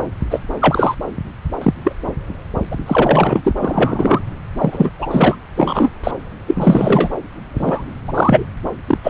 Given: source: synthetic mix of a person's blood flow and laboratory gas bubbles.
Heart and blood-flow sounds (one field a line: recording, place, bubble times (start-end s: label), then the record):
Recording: Doppler ultrasound of blood flow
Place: subclavian vein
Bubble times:
0.30-0.40 s: bubbles
0.59-0.95 s: bubbles
1.61-1.74 s: bubbles
1.84-1.96 s: bubbles
2.71-2.75 s: bubbles
2.86-3.42 s: bubbles
3.44-3.53 s: bubbles
3.60-4.20 s: bubbles
4.57-4.90 s: bubbles
4.99-5.35 s: bubbles
5.56-5.89 s: bubbles
6.04-6.11 s: bubbles
6.47-7.09 s: bubbles
7.53-7.85 s: bubbles
8.07-8.47 s: bubbles
8.87-8.98 s: bubbles
9.04-9.10 s: bubbles
From the record:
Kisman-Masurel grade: 243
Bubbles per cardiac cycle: several, 3 to 8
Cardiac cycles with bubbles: 100%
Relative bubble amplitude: loud (0.450 to 0.775)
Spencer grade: 3 (all of the cardiac periods contain showers or single bubble signals, but not dominating or overriding the cardiac motion signals)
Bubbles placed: anywhere in the cardiac cycle